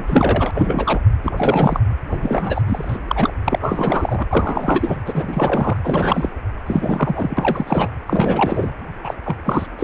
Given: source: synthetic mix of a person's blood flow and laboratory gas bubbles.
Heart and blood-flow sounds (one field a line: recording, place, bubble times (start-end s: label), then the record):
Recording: Doppler ultrasound of blood flow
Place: precordium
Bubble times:
0.00-0.51 s: bubbles
0.54-0.99 s: bubbles
1.24-1.80 s: bubbles
2.09-2.62 s: bubbles
2.66-2.98 s: bubbles
3.07-3.33 s: bubbles
3.44-5.00 s: bubbles
5.05-5.77 s: bubbles
5.82-6.29 s: bubbles
6.66-7.88 s: bubbles
8.07-8.73 s: bubbles
9.04-9.14 s: bubbles
9.25-9.36 s: bubbles
9.45-9.66 s: bubbles
9.79-9.84 s: bubbles
From the record:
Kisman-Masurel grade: 343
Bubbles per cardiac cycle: rolling drumbeat, 9 or more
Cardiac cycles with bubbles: 100%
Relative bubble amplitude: loud (0.450 to 0.775)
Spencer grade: 3 (all of the cardiac periods contain showers or single bubble signals, but not dominating or overriding the cardiac motion signals)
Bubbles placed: anywhere in the cardiac cycle